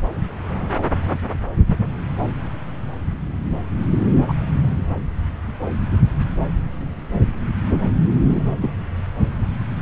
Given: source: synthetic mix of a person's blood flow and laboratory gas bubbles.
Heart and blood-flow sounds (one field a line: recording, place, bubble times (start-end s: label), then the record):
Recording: Doppler ultrasound of blood flow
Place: subclavian vein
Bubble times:
1.66-1.77 s: bubbles
4.28-4.33 s: bubbles
7.71-7.83 s: bubbles
8.28-8.43 s: bubbles
8.60-8.71 s: bubbles
From the record:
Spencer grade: 2 (many but less than half of the cardiac periods contain bubble signals, singularly or in groups)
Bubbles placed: anywhere in the cardiac cycle